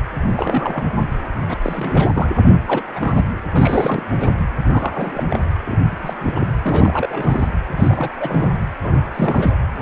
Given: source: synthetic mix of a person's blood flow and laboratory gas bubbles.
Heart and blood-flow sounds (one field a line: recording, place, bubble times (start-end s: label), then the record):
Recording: Doppler ultrasound of blood flow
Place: precordium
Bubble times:
0.36-0.83 s: bubbles
1.48-1.56 s: bubbles
1.61-2.29 s: bubbles
2.66-2.84 s: bubbles
2.96-3.23 s: bubbles
3.52-4.04 s: bubbles
4.20-4.30 s: bubbles
4.70-5.26 s: bubbles
5.30-5.39 s: bubbles
5.65-5.78 s: bubbles
5.90-6.53 s: bubbles
6.65-7.49 s: bubbles
7.68-8.49 s: bubbles
8.81-9.08 s: bubbles
9.14-9.54 s: bubbles
From the record:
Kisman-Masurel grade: 242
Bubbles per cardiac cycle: several, 3 to 8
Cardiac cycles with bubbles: 100%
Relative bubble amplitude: moderate (0.250 to 0.450)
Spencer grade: 3 (all of the cardiac periods contain showers or single bubble signals, but not dominating or overriding the cardiac motion signals)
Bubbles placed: anywhere in the cardiac cycle